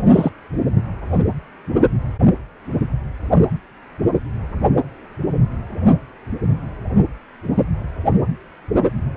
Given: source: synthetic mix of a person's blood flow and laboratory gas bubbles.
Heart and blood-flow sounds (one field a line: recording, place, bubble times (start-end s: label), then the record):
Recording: Doppler ultrasound of blood flow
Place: precordium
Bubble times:
0.11-0.30 s: bubbles
From the record:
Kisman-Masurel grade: 123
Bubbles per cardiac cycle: 1 to 2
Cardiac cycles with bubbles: 10 to 50%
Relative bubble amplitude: loud (0.450 to 0.775)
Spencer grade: 2 (many but less than half of the cardiac periods contain bubble signals, singularly or in groups)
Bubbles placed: only in the low amplitude regions of the cardiac cycle